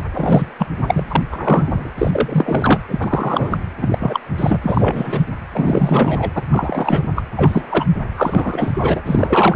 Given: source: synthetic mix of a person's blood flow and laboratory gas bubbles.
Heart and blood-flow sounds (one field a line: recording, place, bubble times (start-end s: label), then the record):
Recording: Doppler ultrasound of blood flow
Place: precordium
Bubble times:
0.13-0.52 s: bubbles
0.58-0.66 s: bubbles
0.87-1.22 s: bubbles
1.31-1.90 s: bubbles
1.98-2.80 s: bubbles
2.88-3.58 s: bubbles
3.81-4.20 s: bubbles
4.38-5.25 s: bubbles
5.52-6.31 s: bubbles
6.34-6.42 s: bubbles
6.49-7.03 s: bubbles
7.16-7.23 s: bubbles
7.36-7.63 s: bubbles
7.69-7.85 s: bubbles
8.14-9.01 s: bubbles
9.05-9.56 s: bubbles
From the record:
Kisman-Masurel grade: 343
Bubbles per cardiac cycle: rolling drumbeat, 9 or more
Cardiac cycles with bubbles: 100%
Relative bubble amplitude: loud (0.450 to 0.775)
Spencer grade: 3 (all of the cardiac periods contain showers or single bubble signals, but not dominating or overriding the cardiac motion signals)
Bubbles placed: anywhere in the cardiac cycle